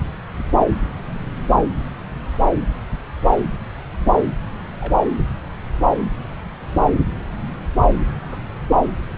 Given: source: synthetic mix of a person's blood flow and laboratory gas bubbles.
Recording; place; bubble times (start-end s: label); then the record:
Doppler ultrasound of blood flow; subclavian vein
0.79-0.93 s: bubbles
4.80-5.00 s: bubbles
8.00-8.05 s: bubbles
8.31-8.38 s: bubbles
From the record:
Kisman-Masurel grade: 121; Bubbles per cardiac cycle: 1 to 2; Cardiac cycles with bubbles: 10 to 50%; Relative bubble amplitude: barely perceptible (0.100 to 0.250); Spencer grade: 2 (many but less than half of the cardiac periods contain bubble signals, singularly or in groups); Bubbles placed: anywhere in the cardiac cycle